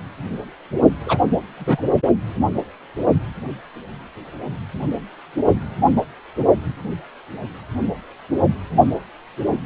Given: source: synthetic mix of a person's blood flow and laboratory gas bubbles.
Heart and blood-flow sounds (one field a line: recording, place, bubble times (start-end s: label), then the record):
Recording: Doppler ultrasound of blood flow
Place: precordium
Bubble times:
1.05-1.18 s: bubbles
1.57-1.81 s: bubbles
From the record:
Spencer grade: 2 (many but less than half of the cardiac periods contain bubble signals, singularly or in groups)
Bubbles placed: only in the low amplitude regions of the cardiac cycle